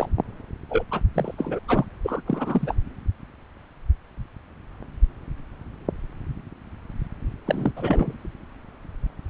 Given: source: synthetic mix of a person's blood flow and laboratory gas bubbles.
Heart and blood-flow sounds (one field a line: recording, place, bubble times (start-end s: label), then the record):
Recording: Doppler ultrasound of blood flow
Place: subclavian vein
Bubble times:
0.00-0.09 s: bubbles
0.70-0.84 s: bubbles
0.91-1.01 s: bubbles
1.14-1.34 s: bubbles
1.38-1.60 s: bubbles
1.67-1.85 s: bubbles
2.04-2.21 s: bubbles
2.26-2.75 s: bubbles
7.46-7.72 s: bubbles
7.76-8.17 s: bubbles
From the record:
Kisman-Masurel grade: 332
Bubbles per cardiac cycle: rolling drumbeat, 9 or more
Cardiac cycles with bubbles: 50 to 99%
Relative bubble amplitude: moderate (0.250 to 0.450)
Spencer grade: 3 (all of the cardiac periods contain showers or single bubble signals, but not dominating or overriding the cardiac motion signals)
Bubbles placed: anywhere in the cardiac cycle